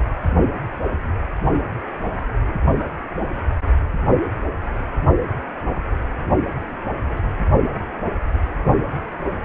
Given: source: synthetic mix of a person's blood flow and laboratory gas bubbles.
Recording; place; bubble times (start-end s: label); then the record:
Doppler ultrasound of blood flow; precordium
no bubbles
From the record:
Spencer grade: 0 (complete lack of bubble signals)